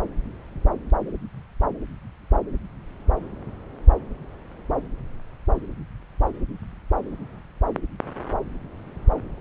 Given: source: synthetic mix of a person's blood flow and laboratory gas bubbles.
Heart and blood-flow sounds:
Doppler ultrasound of blood flow; subclavian vein
no bubbles
From the record:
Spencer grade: 0 (complete lack of bubble signals)

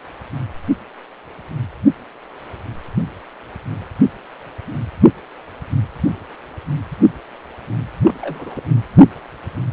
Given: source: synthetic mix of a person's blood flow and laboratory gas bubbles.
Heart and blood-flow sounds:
Doppler ultrasound of blood flow; precordium
8.01-8.19 s: bubbles
8.21-8.63 s: bubbles
From the record:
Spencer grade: 1 (occasional bubble signal discernible with the cardiac motion signal, with majority of cardiac periods free of bubbles); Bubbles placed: anywhere in the cardiac cycle

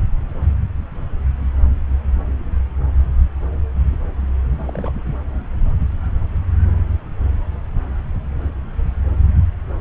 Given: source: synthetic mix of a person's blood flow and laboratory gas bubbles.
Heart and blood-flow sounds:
Doppler ultrasound of blood flow; subclavian vein
4.58-4.93 s: bubbles
From the record:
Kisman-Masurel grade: 211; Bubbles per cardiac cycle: several, 3 to 8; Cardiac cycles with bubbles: 1 to 10%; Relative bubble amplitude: barely perceptible (0.100 to 0.250); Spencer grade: 1 (occasional bubble signal discernible with the cardiac motion signal, with majority of cardiac periods free of bubbles); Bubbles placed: anywhere in the cardiac cycle

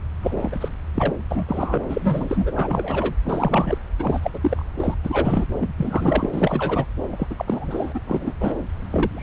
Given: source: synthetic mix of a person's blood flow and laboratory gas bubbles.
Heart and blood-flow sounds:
Doppler ultrasound of blood flow; subclavian vein
0.22-0.68 s: bubbles
0.94-1.16 s: bubbles
1.30-1.44 s: bubbles
1.47-1.81 s: bubbles
1.89-2.52 s: bubbles
2.56-3.14 s: bubbles
3.25-3.78 s: bubbles
3.99-4.20 s: bubbles
4.22-4.30 s: bubbles
4.33-4.39 s: bubbles
4.42-4.64 s: bubbles
4.78-4.95 s: bubbles
5.04-5.46 s: bubbles
5.61-5.73 s: bubbles
5.78-6.29 s: bubbles
6.32-6.86 s: bubbles
7.12-7.28 s: bubbles
7.30-7.34 s: bubbles
7.38-7.45 s: bubbles
7.48-7.99 s: bubbles
8.06-8.34 s: bubbles
8.40-8.54 s: bubbles
8.91-9.23 s: bubbles
From the record:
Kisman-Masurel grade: 342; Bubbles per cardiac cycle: rolling drumbeat, 9 or more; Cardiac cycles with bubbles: 100%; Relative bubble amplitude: moderate (0.250 to 0.450); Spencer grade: 3 (all of the cardiac periods contain showers or single bubble signals, but not dominating or overriding the cardiac motion signals); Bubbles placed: anywhere in the cardiac cycle

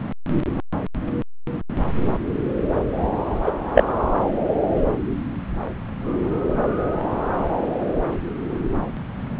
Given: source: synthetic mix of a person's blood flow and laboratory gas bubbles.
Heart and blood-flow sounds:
Doppler ultrasound of blood flow; subclavian vein
3.44-3.52 s: bubbles
3.75-3.83 s: bubbles
From the record:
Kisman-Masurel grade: 113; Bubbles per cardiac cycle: 1 to 2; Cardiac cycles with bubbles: 1 to 10%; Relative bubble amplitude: loud (0.450 to 0.775); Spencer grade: 1 (occasional bubble signal discernible with the cardiac motion signal, with majority of cardiac periods free of bubbles); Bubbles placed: anywhere in the cardiac cycle

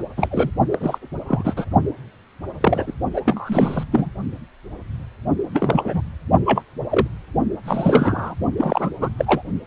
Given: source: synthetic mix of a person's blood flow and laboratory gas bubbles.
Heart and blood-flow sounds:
Doppler ultrasound of blood flow; precordium
0.17-0.28 s: bubbles
0.31-0.50 s: bubbles
0.70-0.98 s: bubbles
1.27-1.66 s: bubbles
2.60-2.93 s: bubbles
3.14-3.21 s: bubbles
3.25-3.83 s: bubbles
3.92-4.11 s: bubbles
5.54-6.01 s: bubbles
6.46-6.62 s: bubbles
6.90-7.07 s: bubbles
7.63-8.34 s: bubbles
8.57-8.89 s: bubbles
9.00-9.09 s: bubbles
9.18-9.42 s: bubbles
From the record:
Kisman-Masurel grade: 232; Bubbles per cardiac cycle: several, 3 to 8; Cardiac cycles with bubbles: 50 to 99%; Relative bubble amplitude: moderate (0.250 to 0.450); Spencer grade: 3 (all of the cardiac periods contain showers or single bubble signals, but not dominating or overriding the cardiac motion signals); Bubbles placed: only in the low amplitude regions of the cardiac cycle

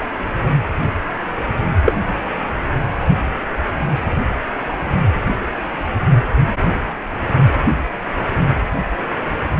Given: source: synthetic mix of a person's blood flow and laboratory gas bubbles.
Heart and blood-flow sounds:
Doppler ultrasound of blood flow; precordium
1.85-1.96 s: bubbles
From the record:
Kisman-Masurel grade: 113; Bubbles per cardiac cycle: 1 to 2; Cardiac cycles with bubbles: 1 to 10%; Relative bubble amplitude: loud (0.450 to 0.775); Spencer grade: 1 (occasional bubble signal discernible with the cardiac motion signal, with majority of cardiac periods free of bubbles); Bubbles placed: anywhere in the cardiac cycle

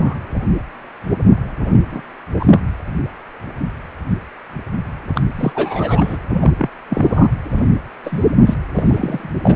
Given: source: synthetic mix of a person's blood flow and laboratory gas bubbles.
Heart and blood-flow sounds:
Doppler ultrasound of blood flow; precordium
0.00-0.16 s: bubbles
1.64-2.02 s: bubbles
2.40-2.59 s: bubbles
5.15-5.21 s: bubbles
5.35-5.53 s: bubbles
5.55-6.17 s: bubbles
6.33-6.51 s: bubbles
6.58-6.70 s: bubbles
6.89-7.28 s: bubbles
7.55-7.68 s: bubbles
8.04-8.25 s: bubbles
8.46-8.55 s: bubbles
8.76-9.29 s: bubbles
9.43-9.56 s: bubbles
From the record:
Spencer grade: 3 (all of the cardiac periods contain showers or single bubble signals, but not dominating or overriding the cardiac motion signals); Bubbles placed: anywhere in the cardiac cycle

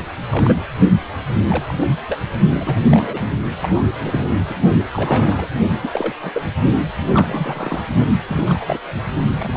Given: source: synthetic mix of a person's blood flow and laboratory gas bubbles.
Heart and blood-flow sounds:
Doppler ultrasound of blood flow; precordium
0.29-0.62 s: bubbles
1.47-1.86 s: bubbles
2.09-2.19 s: bubbles
2.50-3.19 s: bubbles
3.62-3.68 s: bubbles
3.74-3.91 s: bubbles
4.00-4.54 s: bubbles
4.92-5.47 s: bubbles
5.81-6.14 s: bubbles
6.22-6.31 s: bubbles
6.35-6.42 s: bubbles
7.06-7.83 s: bubbles
8.28-8.79 s: bubbles
9.38-9.57 s: bubbles
From the record:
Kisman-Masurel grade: 242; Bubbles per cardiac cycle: several, 3 to 8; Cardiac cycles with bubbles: 100%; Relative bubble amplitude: moderate (0.250 to 0.450); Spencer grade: 3 (all of the cardiac periods contain showers or single bubble signals, but not dominating or overriding the cardiac motion signals); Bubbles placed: only in the low amplitude regions of the cardiac cycle

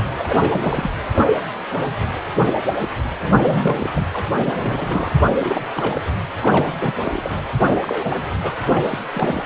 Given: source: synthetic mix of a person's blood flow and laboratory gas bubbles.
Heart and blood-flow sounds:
Doppler ultrasound of blood flow; precordium
0.19-0.91 s: bubbles
2.46-2.54 s: bubbles
2.79-2.89 s: bubbles
3.17-3.90 s: bubbles
3.97-4.07 s: bubbles
4.13-4.24 s: bubbles
4.37-5.09 s: bubbles
5.38-5.66 s: bubbles
5.76-6.01 s: bubbles
6.43-7.29 s: bubbles
7.74-8.20 s: bubbles
8.42-8.53 s: bubbles
8.64-8.99 s: bubbles
9.11-9.46 s: bubbles
From the record:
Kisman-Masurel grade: 332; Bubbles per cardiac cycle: rolling drumbeat, 9 or more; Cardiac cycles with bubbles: 50 to 99%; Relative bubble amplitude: moderate (0.250 to 0.450); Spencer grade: 3 (all of the cardiac periods contain showers or single bubble signals, but not dominating or overriding the cardiac motion signals); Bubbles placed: anywhere in the cardiac cycle

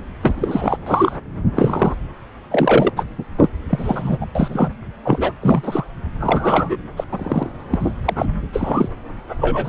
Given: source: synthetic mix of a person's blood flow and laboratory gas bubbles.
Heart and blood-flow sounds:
Doppler ultrasound of blood flow; subclavian vein
0.21-0.77 s: bubbles
0.86-1.17 s: bubbles
1.54-1.95 s: bubbles
2.50-2.90 s: bubbles
2.96-3.06 s: bubbles
3.18-3.24 s: bubbles
3.38-3.50 s: bubbles
3.69-4.18 s: bubbles
4.21-4.26 s: bubbles
4.35-4.70 s: bubbles
5.04-5.32 s: bubbles
5.42-5.85 s: bubbles
6.20-6.78 s: bubbles
6.96-7.04 s: bubbles
7.12-7.50 s: bubbles
7.71-7.76 s: bubbles
7.79-7.94 s: bubbles
8.05-8.25 s: bubbles
8.52-8.88 s: bubbles
9.40-9.69 s: bubbles
From the record:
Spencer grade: 3 (all of the cardiac periods contain showers or single bubble signals, but not dominating or overriding the cardiac motion signals); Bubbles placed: anywhere in the cardiac cycle

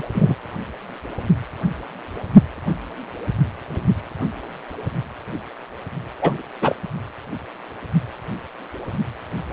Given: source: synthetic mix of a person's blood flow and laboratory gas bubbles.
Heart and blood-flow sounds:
Doppler ultrasound of blood flow; precordium
0.00-0.02 s: bubbles
0.14-0.35 s: bubbles
6.21-6.42 s: bubbles
6.62-6.75 s: bubbles
From the record:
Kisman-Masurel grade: 222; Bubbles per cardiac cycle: several, 3 to 8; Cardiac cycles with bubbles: 10 to 50%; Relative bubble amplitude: moderate (0.250 to 0.450); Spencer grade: 2 (many but less than half of the cardiac periods contain bubble signals, singularly or in groups); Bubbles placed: anywhere in the cardiac cycle

